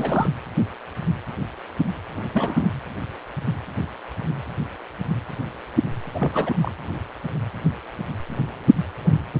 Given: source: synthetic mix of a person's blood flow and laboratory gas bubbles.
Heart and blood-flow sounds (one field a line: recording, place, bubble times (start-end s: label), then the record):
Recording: Doppler ultrasound of blood flow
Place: precordium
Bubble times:
0.00-0.30 s: bubbles
2.14-2.26 s: bubbles
2.33-2.70 s: bubbles
6.15-6.54 s: bubbles
6.62-6.71 s: bubbles
From the record:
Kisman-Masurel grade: 221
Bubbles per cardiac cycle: several, 3 to 8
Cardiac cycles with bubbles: 10 to 50%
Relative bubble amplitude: barely perceptible (0.100 to 0.250)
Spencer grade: 2 (many but less than half of the cardiac periods contain bubble signals, singularly or in groups)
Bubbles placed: anywhere in the cardiac cycle